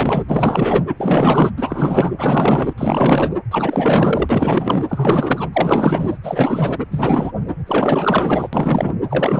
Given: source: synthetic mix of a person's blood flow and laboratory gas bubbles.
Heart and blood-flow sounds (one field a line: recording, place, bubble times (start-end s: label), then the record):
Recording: Doppler ultrasound of blood flow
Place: precordium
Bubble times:
0.00-0.23 s: bubbles
0.28-0.84 s: bubbles
0.98-1.51 s: bubbles
1.57-2.12 s: bubbles
2.18-2.73 s: bubbles
2.77-3.34 s: bubbles
3.51-4.84 s: bubbles
4.89-5.50 s: bubbles
5.53-6.17 s: bubbles
6.23-6.79 s: bubbles
6.91-7.32 s: bubbles
7.65-8.48 s: bubbles
8.53-8.95 s: bubbles
9.10-9.40 s: bubbles
From the record:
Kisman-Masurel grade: 444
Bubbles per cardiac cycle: continuous sound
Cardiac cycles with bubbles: 100%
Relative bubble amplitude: maximal (0.775 to 0.999)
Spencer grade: 4 (maximum detectable bubble signal sounding continuously throughout systole and diastole of every cardiac period, and overriding the amplitude of the normal cardiac signals)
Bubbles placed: anywhere in the cardiac cycle